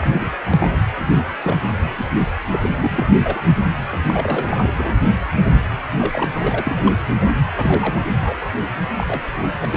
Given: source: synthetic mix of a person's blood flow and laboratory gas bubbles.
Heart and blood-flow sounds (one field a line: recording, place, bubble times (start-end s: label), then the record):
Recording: Doppler ultrasound of blood flow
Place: precordium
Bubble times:
0.00-0.36 s: bubbles
0.46-0.83 s: bubbles
1.43-1.59 s: bubbles
1.79-1.95 s: bubbles
1.97-2.09 s: bubbles
2.52-2.69 s: bubbles
2.80-3.16 s: bubbles
3.22-3.40 s: bubbles
3.92-3.98 s: bubbles
4.07-4.69 s: bubbles
4.77-4.94 s: bubbles
5.44-5.56 s: bubbles
5.98-6.25 s: bubbles
6.33-6.93 s: bubbles
7.56-8.01 s: bubbles
8.21-8.40 s: bubbles
8.97-9.21 s: bubbles
9.61-9.77 s: bubbles
From the record:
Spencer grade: 3 (all of the cardiac periods contain showers or single bubble signals, but not dominating or overriding the cardiac motion signals)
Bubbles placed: anywhere in the cardiac cycle